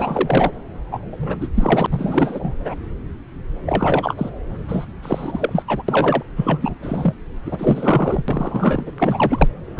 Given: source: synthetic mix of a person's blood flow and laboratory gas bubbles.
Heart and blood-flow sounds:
Doppler ultrasound of blood flow; subclavian vein
0.00-0.51 s: bubbles
0.91-0.98 s: bubbles
1.11-1.49 s: bubbles
1.54-1.86 s: bubbles
1.91-2.56 s: bubbles
2.65-2.75 s: bubbles
3.66-4.29 s: bubbles
4.68-4.86 s: bubbles
5.02-5.63 s: bubbles
5.67-5.82 s: bubbles
5.88-6.22 s: bubbles
6.36-6.75 s: bubbles
6.82-7.14 s: bubbles
7.46-8.23 s: bubbles
8.28-8.92 s: bubbles
8.98-9.49 s: bubbles
9.66-9.80 s: bubbles
From the record:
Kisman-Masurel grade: 333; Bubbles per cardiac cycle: rolling drumbeat, 9 or more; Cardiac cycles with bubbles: 50 to 99%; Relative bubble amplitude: loud (0.450 to 0.775); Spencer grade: 3 (all of the cardiac periods contain showers or single bubble signals, but not dominating or overriding the cardiac motion signals); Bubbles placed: anywhere in the cardiac cycle

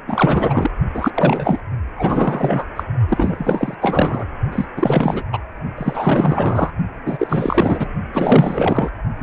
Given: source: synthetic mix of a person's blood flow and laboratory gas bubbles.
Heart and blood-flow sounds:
Doppler ultrasound of blood flow; precordium
0.08-0.71 s: bubbles
0.94-1.61 s: bubbles
1.96-2.67 s: bubbles
2.75-2.83 s: bubbles
3.08-3.75 s: bubbles
3.81-4.25 s: bubbles
4.52-4.65 s: bubbles
4.76-5.23 s: bubbles
5.33-5.39 s: bubbles
5.77-6.71 s: bubbles
7.05-7.88 s: bubbles
8.12-8.89 s: bubbles
9.19-9.23 s: bubbles
From the record:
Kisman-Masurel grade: 444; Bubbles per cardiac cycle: continuous sound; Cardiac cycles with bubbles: 100%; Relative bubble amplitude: maximal (0.775 to 0.999); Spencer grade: 4 (maximum detectable bubble signal sounding continuously throughout systole and diastole of every cardiac period, and overriding the amplitude of the normal cardiac signals); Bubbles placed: only in the low amplitude regions of the cardiac cycle

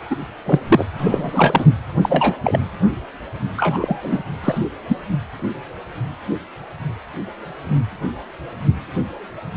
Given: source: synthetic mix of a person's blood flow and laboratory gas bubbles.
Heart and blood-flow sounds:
Doppler ultrasound of blood flow; precordium
0.10-0.16 s: bubbles
0.45-0.59 s: bubbles
0.68-0.85 s: bubbles
0.98-1.66 s: bubbles
2.01-2.37 s: bubbles
2.43-2.59 s: bubbles
3.57-4.22 s: bubbles
4.43-4.58 s: bubbles
4.88-4.96 s: bubbles
From the record:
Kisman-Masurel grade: 233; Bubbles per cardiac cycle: several, 3 to 8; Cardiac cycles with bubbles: 50 to 99%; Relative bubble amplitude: loud (0.450 to 0.775); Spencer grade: 3 (all of the cardiac periods contain showers or single bubble signals, but not dominating or overriding the cardiac motion signals); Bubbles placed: anywhere in the cardiac cycle

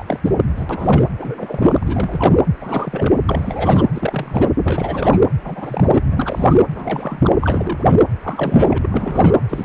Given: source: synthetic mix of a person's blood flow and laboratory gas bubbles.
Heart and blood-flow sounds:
Doppler ultrasound of blood flow; precordium
0.00-0.04 s: bubbles
0.06-0.20 s: bubbles
0.24-0.35 s: bubbles
0.56-0.66 s: bubbles
0.69-1.05 s: bubbles
1.18-1.83 s: bubbles
1.86-2.39 s: bubbles
2.60-3.22 s: bubbles
3.29-3.85 s: bubbles
3.94-4.51 s: bubbles
4.64-5.20 s: bubbles
5.42-6.04 s: bubbles
6.11-6.58 s: bubbles
6.73-7.36 s: bubbles
7.40-7.99 s: bubbles
8.21-8.78 s: bubbles
8.81-9.36 s: bubbles
9.49-9.65 s: bubbles
From the record:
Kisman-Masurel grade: 342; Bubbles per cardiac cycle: rolling drumbeat, 9 or more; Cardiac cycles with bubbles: 100%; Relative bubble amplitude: moderate (0.250 to 0.450); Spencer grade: 3 (all of the cardiac periods contain showers or single bubble signals, but not dominating or overriding the cardiac motion signals); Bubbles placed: anywhere in the cardiac cycle

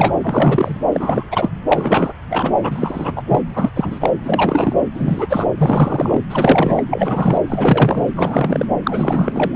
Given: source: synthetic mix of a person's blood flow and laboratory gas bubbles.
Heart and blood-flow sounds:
Doppler ultrasound of blood flow; subclavian vein
0.00-0.13 s: bubbles
0.20-0.77 s: bubbles
0.93-1.28 s: bubbles
1.31-1.50 s: bubbles
1.69-2.14 s: bubbles
2.30-2.51 s: bubbles
2.62-3.23 s: bubbles
3.27-3.42 s: bubbles
3.48-3.70 s: bubbles
3.75-4.11 s: bubbles
4.24-4.78 s: bubbles
4.93-5.48 s: bubbles
5.58-6.22 s: bubbles
6.29-6.83 s: bubbles
6.90-7.38 s: bubbles
7.46-8.02 s: bubbles
8.16-8.65 s: bubbles
8.83-9.56 s: bubbles
From the record:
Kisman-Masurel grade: 343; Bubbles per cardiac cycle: rolling drumbeat, 9 or more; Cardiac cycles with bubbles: 100%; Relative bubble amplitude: loud (0.450 to 0.775); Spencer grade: 3 (all of the cardiac periods contain showers or single bubble signals, but not dominating or overriding the cardiac motion signals); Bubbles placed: anywhere in the cardiac cycle

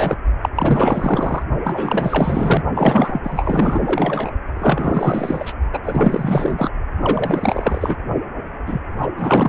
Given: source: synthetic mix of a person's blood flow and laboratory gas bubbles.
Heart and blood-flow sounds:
Doppler ultrasound of blood flow; precordium
0.00-0.16 s: bubbles
0.42-0.49 s: bubbles
0.55-1.42 s: bubbles
1.64-2.63 s: bubbles
2.74-3.20 s: bubbles
3.24-4.30 s: bubbles
4.55-5.53 s: bubbles
5.73-5.79 s: bubbles
5.83-6.70 s: bubbles
7.00-7.97 s: bubbles
8.65-8.81 s: bubbles
8.97-9.07 s: bubbles
9.16-9.49 s: bubbles
From the record:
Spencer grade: 4 (maximum detectable bubble signal sounding continuously throughout systole and diastole of every cardiac period, and overriding the amplitude of the normal cardiac signals); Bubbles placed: only in the low amplitude regions of the cardiac cycle

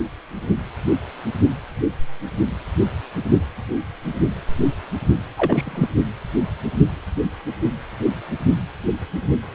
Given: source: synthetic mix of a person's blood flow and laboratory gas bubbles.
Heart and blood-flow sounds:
Doppler ultrasound of blood flow; precordium
5.37-5.88 s: bubbles
From the record:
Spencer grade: 2 (many but less than half of the cardiac periods contain bubble signals, singularly or in groups); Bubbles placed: only in the low amplitude regions of the cardiac cycle

